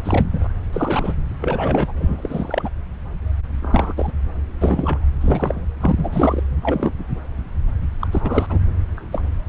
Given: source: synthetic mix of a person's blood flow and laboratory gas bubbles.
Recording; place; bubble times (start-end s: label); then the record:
Doppler ultrasound of blood flow; subclavian vein
0.04-0.48 s: bubbles
0.72-1.12 s: bubbles
1.41-1.93 s: bubbles
1.95-2.70 s: bubbles
3.62-3.93 s: bubbles
3.97-4.12 s: bubbles
4.61-5.04 s: bubbles
5.21-5.61 s: bubbles
5.80-6.44 s: bubbles
6.62-6.91 s: bubbles
8.00-8.07 s: bubbles
8.12-8.47 s: bubbles
8.50-8.60 s: bubbles
8.97-9.07 s: bubbles
9.12-9.22 s: bubbles
From the record:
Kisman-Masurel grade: 233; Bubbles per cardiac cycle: several, 3 to 8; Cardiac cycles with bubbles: 50 to 99%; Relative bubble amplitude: loud (0.450 to 0.775); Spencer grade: 3 (all of the cardiac periods contain showers or single bubble signals, but not dominating or overriding the cardiac motion signals); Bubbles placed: anywhere in the cardiac cycle